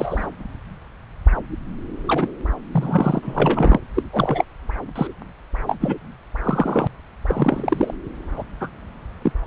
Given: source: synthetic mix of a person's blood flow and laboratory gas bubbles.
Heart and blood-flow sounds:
Doppler ultrasound of blood flow; subclavian vein
0.00-0.27 s: bubbles
2.07-2.30 s: bubbles
2.71-3.79 s: bubbles
3.94-4.02 s: bubbles
4.10-4.44 s: bubbles
4.96-5.08 s: bubbles
5.67-5.77 s: bubbles
5.80-5.95 s: bubbles
6.44-6.88 s: bubbles
7.28-7.94 s: bubbles
8.37-8.44 s: bubbles
8.60-8.68 s: bubbles
9.21-9.32 s: bubbles
From the record:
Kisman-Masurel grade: 233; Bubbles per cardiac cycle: several, 3 to 8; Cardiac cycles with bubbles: 50 to 99%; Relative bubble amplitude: loud (0.450 to 0.775); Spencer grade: 3 (all of the cardiac periods contain showers or single bubble signals, but not dominating or overriding the cardiac motion signals); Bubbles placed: anywhere in the cardiac cycle

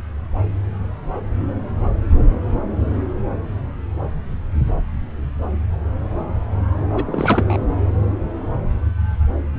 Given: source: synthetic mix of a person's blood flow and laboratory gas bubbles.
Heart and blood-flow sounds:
Doppler ultrasound of blood flow; subclavian vein
6.95-7.57 s: bubbles
From the record:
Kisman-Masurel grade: 212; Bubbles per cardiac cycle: several, 3 to 8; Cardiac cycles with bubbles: 1 to 10%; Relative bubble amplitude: moderate (0.250 to 0.450); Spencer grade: 1 (occasional bubble signal discernible with the cardiac motion signal, with majority of cardiac periods free of bubbles); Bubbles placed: anywhere in the cardiac cycle

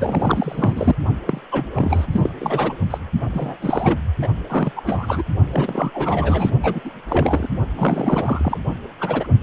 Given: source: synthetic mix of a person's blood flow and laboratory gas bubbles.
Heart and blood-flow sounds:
Doppler ultrasound of blood flow; precordium
0.00-0.95 s: bubbles
1.26-1.41 s: bubbles
1.51-1.67 s: bubbles
1.74-2.06 s: bubbles
2.12-2.29 s: bubbles
2.39-2.73 s: bubbles
2.90-2.98 s: bubbles
3.33-3.99 s: bubbles
4.21-4.28 s: bubbles
4.50-4.71 s: bubbles
4.76-5.24 s: bubbles
5.51-5.90 s: bubbles
5.94-6.50 s: bubbles
6.62-6.92 s: bubbles
7.08-7.49 s: bubbles
7.75-8.57 s: bubbles
9.00-9.27 s: bubbles
9.40-9.43 s: bubbles
From the record:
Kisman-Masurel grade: 332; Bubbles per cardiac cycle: rolling drumbeat, 9 or more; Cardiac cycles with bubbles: 50 to 99%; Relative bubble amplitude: moderate (0.250 to 0.450); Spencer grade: 3 (all of the cardiac periods contain showers or single bubble signals, but not dominating or overriding the cardiac motion signals); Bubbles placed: only in the low amplitude regions of the cardiac cycle

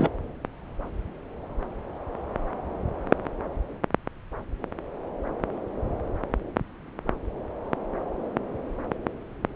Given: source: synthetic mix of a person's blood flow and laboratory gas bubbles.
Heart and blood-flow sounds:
Doppler ultrasound of blood flow; subclavian vein
0.00-0.08 s: bubbles
From the record:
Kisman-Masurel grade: 212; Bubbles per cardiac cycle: several, 3 to 8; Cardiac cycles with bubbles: 1 to 10%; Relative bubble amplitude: moderate (0.250 to 0.450); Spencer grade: 1 (occasional bubble signal discernible with the cardiac motion signal, with majority of cardiac periods free of bubbles); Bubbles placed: anywhere in the cardiac cycle

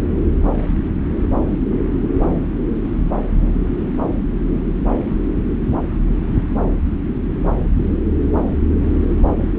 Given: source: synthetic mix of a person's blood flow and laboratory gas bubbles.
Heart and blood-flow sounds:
Doppler ultrasound of blood flow; subclavian vein
9.25-9.35 s: bubbles
From the record:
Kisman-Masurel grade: 111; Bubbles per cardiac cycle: 1 to 2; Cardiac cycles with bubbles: 1 to 10%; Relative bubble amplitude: barely perceptible (0.100 to 0.250); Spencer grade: 1 (occasional bubble signal discernible with the cardiac motion signal, with majority of cardiac periods free of bubbles); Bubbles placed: anywhere in the cardiac cycle

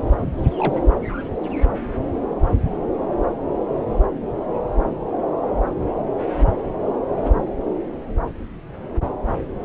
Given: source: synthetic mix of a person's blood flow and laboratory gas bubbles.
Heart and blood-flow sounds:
Doppler ultrasound of blood flow; subclavian vein
0.15-0.32 s: bubbles
0.57-0.86 s: bubbles
From the record:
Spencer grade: 1 (occasional bubble signal discernible with the cardiac motion signal, with majority of cardiac periods free of bubbles); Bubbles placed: anywhere in the cardiac cycle

